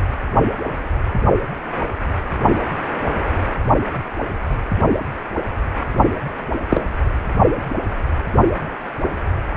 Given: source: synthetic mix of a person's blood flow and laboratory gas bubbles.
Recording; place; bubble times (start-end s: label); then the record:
Doppler ultrasound of blood flow; precordium
6.70-6.85 s: bubbles
From the record:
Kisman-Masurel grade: 113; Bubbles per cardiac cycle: 1 to 2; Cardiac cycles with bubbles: 1 to 10%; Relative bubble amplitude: loud (0.450 to 0.775); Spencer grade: 1 (occasional bubble signal discernible with the cardiac motion signal, with majority of cardiac periods free of bubbles); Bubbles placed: only in the low amplitude regions of the cardiac cycle